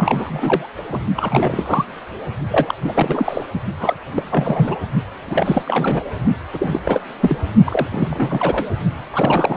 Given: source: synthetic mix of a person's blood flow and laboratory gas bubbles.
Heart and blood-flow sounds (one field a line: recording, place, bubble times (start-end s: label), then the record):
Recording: Doppler ultrasound of blood flow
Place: precordium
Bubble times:
0.00-0.70 s: bubbles
0.89-0.99 s: bubbles
1.17-1.85 s: bubbles
2.47-2.75 s: bubbles
2.81-3.46 s: bubbles
3.79-3.94 s: bubbles
4.14-4.23 s: bubbles
4.30-4.78 s: bubbles
5.26-5.62 s: bubbles
5.65-6.04 s: bubbles
6.54-7.00 s: bubbles
7.20-7.37 s: bubbles
7.64-8.66 s: bubbles
9.12-9.57 s: bubbles
From the record:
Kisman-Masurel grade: 343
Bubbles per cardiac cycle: rolling drumbeat, 9 or more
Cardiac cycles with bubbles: 100%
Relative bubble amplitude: loud (0.450 to 0.775)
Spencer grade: 3 (all of the cardiac periods contain showers or single bubble signals, but not dominating or overriding the cardiac motion signals)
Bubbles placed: only in the low amplitude regions of the cardiac cycle